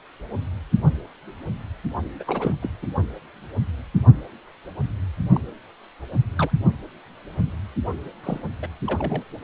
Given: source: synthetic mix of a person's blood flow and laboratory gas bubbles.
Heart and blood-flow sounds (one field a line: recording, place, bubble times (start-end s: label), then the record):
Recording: Doppler ultrasound of blood flow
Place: precordium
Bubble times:
2.19-2.23 s: bubbles
2.27-2.54 s: bubbles
2.62-2.70 s: bubbles
2.82-2.87 s: bubbles
5.33-5.41 s: bubbles
6.38-6.50 s: bubbles
8.23-8.40 s: bubbles
8.62-8.67 s: bubbles
8.86-9.23 s: bubbles
From the record:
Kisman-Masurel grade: 221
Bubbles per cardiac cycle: several, 3 to 8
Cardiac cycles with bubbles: 10 to 50%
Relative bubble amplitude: barely perceptible (0.100 to 0.250)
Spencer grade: 2 (many but less than half of the cardiac periods contain bubble signals, singularly or in groups)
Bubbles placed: only in the low amplitude regions of the cardiac cycle